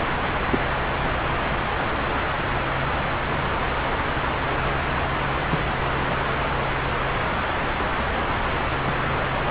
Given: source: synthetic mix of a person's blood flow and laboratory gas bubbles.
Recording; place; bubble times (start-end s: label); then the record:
Doppler ultrasound of blood flow; subclavian vein
0.51-0.59 s: bubbles
5.50-5.61 s: bubbles
6.09-6.18 s: bubbles
8.84-8.92 s: bubbles
From the record:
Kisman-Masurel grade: 121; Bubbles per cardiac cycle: 1 to 2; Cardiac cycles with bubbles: 10 to 50%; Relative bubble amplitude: barely perceptible (0.100 to 0.250); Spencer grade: 2 (many but less than half of the cardiac periods contain bubble signals, singularly or in groups); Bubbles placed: anywhere in the cardiac cycle